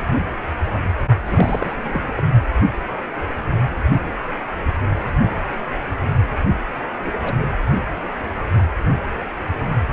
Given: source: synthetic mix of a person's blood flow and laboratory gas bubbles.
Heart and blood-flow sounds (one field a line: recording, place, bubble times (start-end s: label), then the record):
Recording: Doppler ultrasound of blood flow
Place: precordium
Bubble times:
1.19-1.75 s: bubbles
1.82-2.08 s: bubbles
2.15-2.23 s: bubbles
7.05-7.12 s: bubbles
7.23-7.50 s: bubbles
From the record:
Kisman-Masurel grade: 221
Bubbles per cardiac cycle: several, 3 to 8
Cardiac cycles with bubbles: 10 to 50%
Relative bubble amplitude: barely perceptible (0.100 to 0.250)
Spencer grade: 2 (many but less than half of the cardiac periods contain bubble signals, singularly or in groups)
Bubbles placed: anywhere in the cardiac cycle